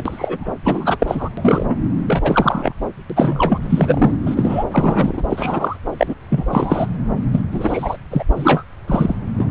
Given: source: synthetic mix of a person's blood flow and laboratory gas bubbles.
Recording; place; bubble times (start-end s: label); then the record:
Doppler ultrasound of blood flow; subclavian vein
0.00-0.49 s: bubbles
0.64-0.96 s: bubbles
0.99-1.29 s: bubbles
1.37-1.76 s: bubbles
2.07-2.73 s: bubbles
3.10-3.58 s: bubbles
3.61-4.12 s: bubbles
4.26-4.64 s: bubbles
4.72-5.22 s: bubbles
5.29-5.76 s: bubbles
5.97-6.14 s: bubbles
6.29-6.46 s: bubbles
6.50-6.86 s: bubbles
7.31-7.42 s: bubbles
7.51-7.97 s: bubbles
8.11-8.24 s: bubbles
8.36-8.63 s: bubbles
8.87-9.15 s: bubbles
9.38-9.50 s: bubbles
From the record:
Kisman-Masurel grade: 243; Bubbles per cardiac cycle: several, 3 to 8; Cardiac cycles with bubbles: 100%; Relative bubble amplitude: loud (0.450 to 0.775); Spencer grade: 3 (all of the cardiac periods contain showers or single bubble signals, but not dominating or overriding the cardiac motion signals); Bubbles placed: anywhere in the cardiac cycle